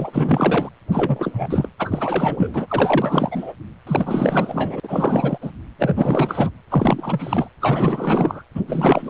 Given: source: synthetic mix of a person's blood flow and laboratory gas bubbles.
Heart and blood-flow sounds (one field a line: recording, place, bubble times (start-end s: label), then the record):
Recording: Doppler ultrasound of blood flow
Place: precordium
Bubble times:
0.00-0.69 s: bubbles
0.92-1.69 s: bubbles
1.79-3.52 s: bubbles
3.87-4.80 s: bubbles
4.83-5.38 s: bubbles
5.41-5.51 s: bubbles
5.78-6.50 s: bubbles
6.70-7.50 s: bubbles
7.61-8.43 s: bubbles
8.54-8.61 s: bubbles
8.68-9.10 s: bubbles
From the record:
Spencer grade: 4 (maximum detectable bubble signal sounding continuously throughout systole and diastole of every cardiac period, and overriding the amplitude of the normal cardiac signals)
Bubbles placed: anywhere in the cardiac cycle